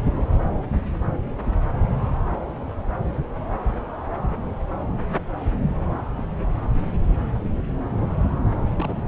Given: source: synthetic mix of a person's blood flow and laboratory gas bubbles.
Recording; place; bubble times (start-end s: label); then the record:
Doppler ultrasound of blood flow; subclavian vein
8.76-8.96 s: bubbles
From the record:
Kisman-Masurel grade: 111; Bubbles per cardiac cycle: 1 to 2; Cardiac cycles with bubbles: 1 to 10%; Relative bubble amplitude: barely perceptible (0.100 to 0.250); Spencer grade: 1 (occasional bubble signal discernible with the cardiac motion signal, with majority of cardiac periods free of bubbles); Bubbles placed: anywhere in the cardiac cycle